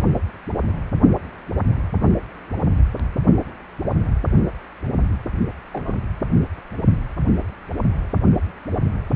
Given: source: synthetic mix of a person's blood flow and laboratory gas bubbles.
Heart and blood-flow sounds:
Doppler ultrasound of blood flow; precordium
5.73-6.00 s: bubbles
From the record:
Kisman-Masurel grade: 111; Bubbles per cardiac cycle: 1 to 2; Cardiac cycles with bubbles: 1 to 10%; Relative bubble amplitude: barely perceptible (0.100 to 0.250); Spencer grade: 1 (occasional bubble signal discernible with the cardiac motion signal, with majority of cardiac periods free of bubbles); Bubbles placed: only in the low amplitude regions of the cardiac cycle

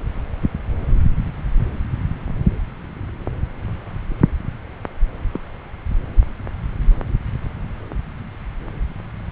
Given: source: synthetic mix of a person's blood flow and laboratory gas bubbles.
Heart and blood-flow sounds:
Doppler ultrasound of blood flow; subclavian vein
5.33-5.40 s: bubbles
From the record:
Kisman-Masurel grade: 111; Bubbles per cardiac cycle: 1 to 2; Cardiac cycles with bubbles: 1 to 10%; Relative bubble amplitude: barely perceptible (0.100 to 0.250); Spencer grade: 1 (occasional bubble signal discernible with the cardiac motion signal, with majority of cardiac periods free of bubbles); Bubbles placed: anywhere in the cardiac cycle

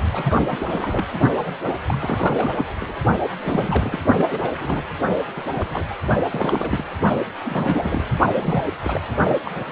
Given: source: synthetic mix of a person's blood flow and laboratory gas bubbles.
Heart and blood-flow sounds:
Doppler ultrasound of blood flow; precordium
0.12-0.38 s: bubbles
0.48-1.06 s: bubbles
1.38-1.55 s: bubbles
1.63-1.75 s: bubbles
1.86-2.66 s: bubbles
2.80-2.96 s: bubbles
3.39-4.00 s: bubbles
4.17-4.40 s: bubbles
4.42-4.50 s: bubbles
4.59-4.83 s: bubbles
5.35-5.43 s: bubbles
5.52-5.83 s: bubbles
5.88-5.94 s: bubbles
6.29-6.84 s: bubbles
7.43-8.04 s: bubbles
8.34-8.64 s: bubbles
8.83-9.01 s: bubbles
9.45-9.51 s: bubbles
9.54-9.72 s: bubbles
From the record:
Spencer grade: 3 (all of the cardiac periods contain showers or single bubble signals, but not dominating or overriding the cardiac motion signals); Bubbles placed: only in the low amplitude regions of the cardiac cycle

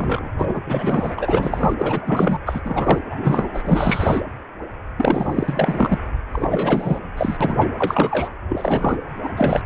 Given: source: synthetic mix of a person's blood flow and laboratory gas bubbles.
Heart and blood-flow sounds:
Doppler ultrasound of blood flow; precordium
0.00-0.30 s: bubbles
0.38-0.60 s: bubbles
0.66-1.15 s: bubbles
1.18-1.74 s: bubbles
1.78-2.38 s: bubbles
2.45-2.60 s: bubbles
2.65-2.98 s: bubbles
3.10-3.48 s: bubbles
3.53-4.21 s: bubbles
4.98-5.99 s: bubbles
6.33-7.00 s: bubbles
7.17-7.37 s: bubbles
7.41-7.67 s: bubbles
7.78-8.29 s: bubbles
8.48-8.97 s: bubbles
9.23-9.29 s: bubbles
9.36-9.62 s: bubbles
From the record:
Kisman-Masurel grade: 333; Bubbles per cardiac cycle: rolling drumbeat, 9 or more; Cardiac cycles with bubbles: 50 to 99%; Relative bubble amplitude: loud (0.450 to 0.775); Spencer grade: 3 (all of the cardiac periods contain showers or single bubble signals, but not dominating or overriding the cardiac motion signals); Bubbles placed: anywhere in the cardiac cycle

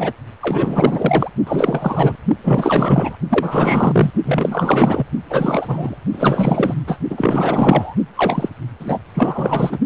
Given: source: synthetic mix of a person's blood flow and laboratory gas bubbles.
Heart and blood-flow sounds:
Doppler ultrasound of blood flow; precordium
0.00-0.12 s: bubbles
0.41-1.30 s: bubbles
1.47-2.16 s: bubbles
2.44-3.17 s: bubbles
3.29-4.11 s: bubbles
4.24-5.06 s: bubbles
5.30-5.97 s: bubbles
6.12-6.75 s: bubbles
6.87-6.99 s: bubbles
7.10-7.96 s: bubbles
8.16-8.49 s: bubbles
8.79-8.99 s: bubbles
9.14-9.79 s: bubbles
From the record:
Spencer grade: 4 (maximum detectable bubble signal sounding continuously throughout systole and diastole of every cardiac period, and overriding the amplitude of the normal cardiac signals); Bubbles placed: only in the low amplitude regions of the cardiac cycle

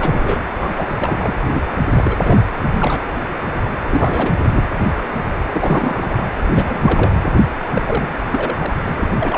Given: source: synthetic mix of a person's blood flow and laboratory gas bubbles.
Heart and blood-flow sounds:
Doppler ultrasound of blood flow; precordium
0.00-0.45 s: bubbles
0.59-0.86 s: bubbles
0.89-0.93 s: bubbles
0.99-1.39 s: bubbles
1.53-1.61 s: bubbles
1.95-2.16 s: bubbles
2.22-2.40 s: bubbles
2.70-3.03 s: bubbles
3.90-4.50 s: bubbles
4.53-4.63 s: bubbles
5.52-6.24 s: bubbles
6.48-7.12 s: bubbles
7.75-7.82 s: bubbles
7.86-8.17 s: bubbles
8.30-8.72 s: bubbles
8.84-9.08 s: bubbles
9.19-9.38 s: bubbles
From the record:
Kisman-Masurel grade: 332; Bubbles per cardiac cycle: rolling drumbeat, 9 or more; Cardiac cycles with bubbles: 50 to 99%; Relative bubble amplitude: moderate (0.250 to 0.450); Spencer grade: 3 (all of the cardiac periods contain showers or single bubble signals, but not dominating or overriding the cardiac motion signals); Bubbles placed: anywhere in the cardiac cycle

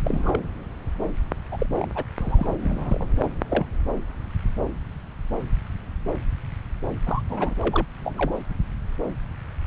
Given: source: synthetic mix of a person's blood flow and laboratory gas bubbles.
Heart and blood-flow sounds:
Doppler ultrasound of blood flow; subclavian vein
0.04-0.39 s: bubbles
1.51-1.66 s: bubbles
1.76-1.88 s: bubbles
1.95-2.03 s: bubbles
2.20-2.54 s: bubbles
2.60-3.06 s: bubbles
3.19-3.28 s: bubbles
3.50-3.66 s: bubbles
7.07-7.21 s: bubbles
7.29-7.54 s: bubbles
7.62-7.85 s: bubbles
8.04-8.13 s: bubbles
8.18-8.32 s: bubbles
From the record:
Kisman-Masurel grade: 221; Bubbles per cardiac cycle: several, 3 to 8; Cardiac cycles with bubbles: 10 to 50%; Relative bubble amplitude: barely perceptible (0.100 to 0.250); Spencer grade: 2 (many but less than half of the cardiac periods contain bubble signals, singularly or in groups); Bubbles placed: anywhere in the cardiac cycle

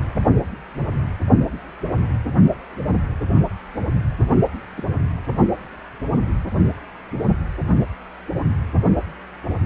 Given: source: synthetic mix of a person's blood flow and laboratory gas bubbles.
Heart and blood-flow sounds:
Doppler ultrasound of blood flow; precordium
4.77-4.83 s: bubbles
From the record:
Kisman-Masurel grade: 111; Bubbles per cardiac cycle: 1 to 2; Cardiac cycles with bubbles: 1 to 10%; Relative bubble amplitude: barely perceptible (0.100 to 0.250); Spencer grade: 1 (occasional bubble signal discernible with the cardiac motion signal, with majority of cardiac periods free of bubbles); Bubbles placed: only in the low amplitude regions of the cardiac cycle

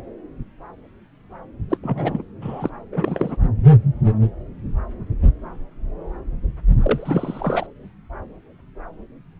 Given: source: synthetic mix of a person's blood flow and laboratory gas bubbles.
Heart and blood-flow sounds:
Doppler ultrasound of blood flow; subclavian vein
1.69-1.77 s: bubbles
1.83-2.23 s: bubbles
2.42-2.69 s: bubbles
2.92-3.37 s: bubbles
6.80-7.67 s: bubbles
From the record:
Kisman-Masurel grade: 222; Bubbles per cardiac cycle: several, 3 to 8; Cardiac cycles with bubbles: 10 to 50%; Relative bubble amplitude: moderate (0.250 to 0.450); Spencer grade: 2 (many but less than half of the cardiac periods contain bubble signals, singularly or in groups); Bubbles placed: anywhere in the cardiac cycle

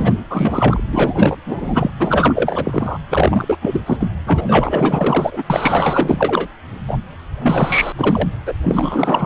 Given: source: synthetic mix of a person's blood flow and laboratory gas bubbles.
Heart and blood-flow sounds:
Doppler ultrasound of blood flow; precordium
0.00-0.14 s: bubbles
0.29-0.82 s: bubbles
0.91-1.38 s: bubbles
1.45-1.91 s: bubbles
2.00-2.99 s: bubbles
3.10-3.57 s: bubbles
3.61-3.81 s: bubbles
3.86-3.97 s: bubbles
4.00-4.08 s: bubbles
4.26-5.42 s: bubbles
5.50-6.47 s: bubbles
6.88-6.99 s: bubbles
7.40-7.93 s: bubbles
7.97-8.29 s: bubbles
8.46-8.53 s: bubbles
8.64-9.26 s: bubbles
From the record:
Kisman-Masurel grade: 444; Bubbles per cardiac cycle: continuous sound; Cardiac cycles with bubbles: 100%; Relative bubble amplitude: maximal (0.775 to 0.999); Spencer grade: 4 (maximum detectable bubble signal sounding continuously throughout systole and diastole of every cardiac period, and overriding the amplitude of the normal cardiac signals); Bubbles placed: anywhere in the cardiac cycle

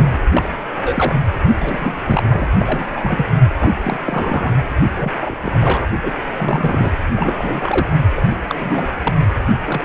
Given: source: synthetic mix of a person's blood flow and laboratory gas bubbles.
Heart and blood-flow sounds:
Doppler ultrasound of blood flow; precordium
0.00-0.20 s: bubbles
0.32-0.48 s: bubbles
0.77-1.21 s: bubbles
1.59-1.94 s: bubbles
2.05-2.46 s: bubbles
2.59-2.90 s: bubbles
2.92-3.34 s: bubbles
3.60-3.71 s: bubbles
3.81-3.97 s: bubbles
4.05-4.52 s: bubbles
4.96-5.12 s: bubbles
5.16-5.35 s: bubbles
5.42-5.89 s: bubbles
6.02-6.13 s: bubbles
6.33-6.91 s: bubbles
7.16-7.98 s: bubbles
8.16-8.24 s: bubbles
8.31-8.37 s: bubbles
8.49-8.92 s: bubbles
9.04-9.14 s: bubbles
9.66-9.85 s: bubbles
From the record:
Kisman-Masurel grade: 332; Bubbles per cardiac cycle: rolling drumbeat, 9 or more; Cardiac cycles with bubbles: 50 to 99%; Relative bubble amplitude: moderate (0.250 to 0.450); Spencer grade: 3 (all of the cardiac periods contain showers or single bubble signals, but not dominating or overriding the cardiac motion signals); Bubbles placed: anywhere in the cardiac cycle

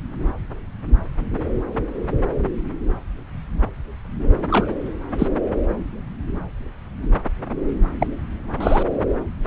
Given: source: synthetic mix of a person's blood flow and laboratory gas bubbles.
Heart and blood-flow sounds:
Doppler ultrasound of blood flow; subclavian vein
4.50-4.67 s: bubbles
5.18-5.28 s: bubbles
8.00-8.07 s: bubbles
8.60-8.83 s: bubbles
From the record:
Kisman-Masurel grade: 122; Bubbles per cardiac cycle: 1 to 2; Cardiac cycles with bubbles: 10 to 50%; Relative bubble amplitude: moderate (0.250 to 0.450); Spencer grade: 2 (many but less than half of the cardiac periods contain bubble signals, singularly or in groups); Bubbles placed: anywhere in the cardiac cycle

